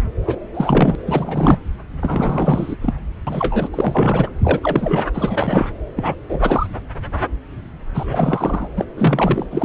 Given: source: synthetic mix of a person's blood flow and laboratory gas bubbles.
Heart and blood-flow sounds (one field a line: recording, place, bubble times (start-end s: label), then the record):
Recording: Doppler ultrasound of blood flow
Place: subclavian vein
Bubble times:
0.23-0.36 s: bubbles
0.54-0.95 s: bubbles
1.06-1.58 s: bubbles
2.01-2.76 s: bubbles
2.82-2.94 s: bubbles
3.27-3.69 s: bubbles
3.73-4.30 s: bubbles
4.43-4.61 s: bubbles
4.63-5.06 s: bubbles
5.15-5.67 s: bubbles
5.96-6.15 s: bubbles
6.29-6.67 s: bubbles
7.94-8.70 s: bubbles
8.76-8.85 s: bubbles
8.96-9.46 s: bubbles
9.52-9.65 s: bubbles
From the record:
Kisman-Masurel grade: 333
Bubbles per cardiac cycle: rolling drumbeat, 9 or more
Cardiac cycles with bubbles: 50 to 99%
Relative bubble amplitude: loud (0.450 to 0.775)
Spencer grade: 3 (all of the cardiac periods contain showers or single bubble signals, but not dominating or overriding the cardiac motion signals)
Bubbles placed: anywhere in the cardiac cycle